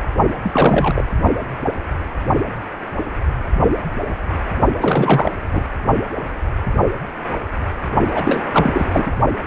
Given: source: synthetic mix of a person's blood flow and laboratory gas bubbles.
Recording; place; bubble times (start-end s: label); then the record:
Doppler ultrasound of blood flow; precordium
0.42-0.93 s: bubbles
0.96-1.04 s: bubbles
4.81-5.32 s: bubbles
5.50-5.64 s: bubbles
8.09-9.17 s: bubbles
From the record:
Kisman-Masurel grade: 333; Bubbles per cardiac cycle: rolling drumbeat, 9 or more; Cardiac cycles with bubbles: 50 to 99%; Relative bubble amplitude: loud (0.450 to 0.775); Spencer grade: 3 (all of the cardiac periods contain showers or single bubble signals, but not dominating or overriding the cardiac motion signals); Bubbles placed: only in the low amplitude regions of the cardiac cycle